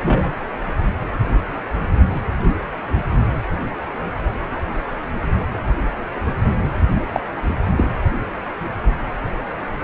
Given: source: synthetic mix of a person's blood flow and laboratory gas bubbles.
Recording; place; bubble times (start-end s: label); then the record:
Doppler ultrasound of blood flow; precordium
0.03-0.34 s: bubbles
7.12-7.20 s: bubbles
7.77-7.85 s: bubbles
From the record:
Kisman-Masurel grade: 122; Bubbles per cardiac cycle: 1 to 2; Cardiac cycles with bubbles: 10 to 50%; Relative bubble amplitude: moderate (0.250 to 0.450); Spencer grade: 2 (many but less than half of the cardiac periods contain bubble signals, singularly or in groups); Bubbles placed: anywhere in the cardiac cycle